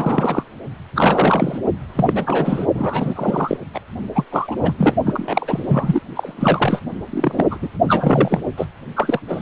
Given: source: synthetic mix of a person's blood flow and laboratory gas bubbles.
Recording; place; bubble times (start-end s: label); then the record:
Doppler ultrasound of blood flow; precordium
0.00-0.43 s: bubbles
0.95-1.58 s: bubbles
1.90-2.66 s: bubbles
2.75-3.57 s: bubbles
3.74-3.79 s: bubbles
4.14-4.24 s: bubbles
4.32-4.56 s: bubbles
4.62-4.75 s: bubbles
4.78-4.95 s: bubbles
5.06-6.01 s: bubbles
6.16-6.80 s: bubbles
7.10-7.46 s: bubbles
7.50-7.58 s: bubbles
7.62-7.68 s: bubbles
7.88-8.41 s: bubbles
8.57-8.66 s: bubbles
8.96-9.20 s: bubbles
9.28-9.41 s: bubbles
From the record:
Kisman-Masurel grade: 343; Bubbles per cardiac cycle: rolling drumbeat, 9 or more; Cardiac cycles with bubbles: 100%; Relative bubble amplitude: loud (0.450 to 0.775); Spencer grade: 3 (all of the cardiac periods contain showers or single bubble signals, but not dominating or overriding the cardiac motion signals); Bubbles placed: only in the low amplitude regions of the cardiac cycle